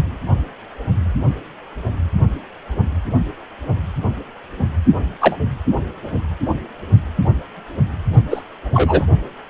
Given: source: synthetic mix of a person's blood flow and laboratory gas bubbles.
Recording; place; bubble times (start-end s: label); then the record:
Doppler ultrasound of blood flow; precordium
5.20-5.38 s: bubbles
8.30-8.43 s: bubbles
8.73-9.05 s: bubbles
From the record:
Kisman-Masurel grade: 123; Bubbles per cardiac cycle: 1 to 2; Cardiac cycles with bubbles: 10 to 50%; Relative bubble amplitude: loud (0.450 to 0.775); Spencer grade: 2 (many but less than half of the cardiac periods contain bubble signals, singularly or in groups); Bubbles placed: only in the low amplitude regions of the cardiac cycle